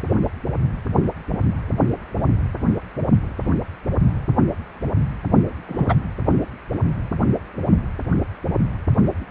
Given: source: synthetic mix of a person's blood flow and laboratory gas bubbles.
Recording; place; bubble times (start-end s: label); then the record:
Doppler ultrasound of blood flow; precordium
5.68-5.95 s: bubbles
From the record:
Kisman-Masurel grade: 113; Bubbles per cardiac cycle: 1 to 2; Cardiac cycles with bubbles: 1 to 10%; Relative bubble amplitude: loud (0.450 to 0.775); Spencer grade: 1 (occasional bubble signal discernible with the cardiac motion signal, with majority of cardiac periods free of bubbles); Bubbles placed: anywhere in the cardiac cycle